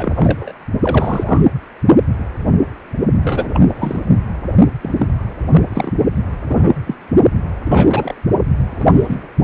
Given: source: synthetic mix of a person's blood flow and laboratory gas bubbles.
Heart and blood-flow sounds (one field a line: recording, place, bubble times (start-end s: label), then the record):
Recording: Doppler ultrasound of blood flow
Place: precordium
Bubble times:
0.00-0.52 s: bubbles
0.82-1.42 s: bubbles
3.24-3.60 s: bubbles
3.68-4.02 s: bubbles
4.81-5.08 s: bubbles
5.50-5.93 s: bubbles
6.48-6.75 s: bubbles
6.86-6.95 s: bubbles
7.65-8.15 s: bubbles
8.70-8.85 s: bubbles
8.93-9.27 s: bubbles
From the record:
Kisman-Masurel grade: 233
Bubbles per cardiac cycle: several, 3 to 8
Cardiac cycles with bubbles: 50 to 99%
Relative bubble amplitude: loud (0.450 to 0.775)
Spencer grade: 3 (all of the cardiac periods contain showers or single bubble signals, but not dominating or overriding the cardiac motion signals)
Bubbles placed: only in the low amplitude regions of the cardiac cycle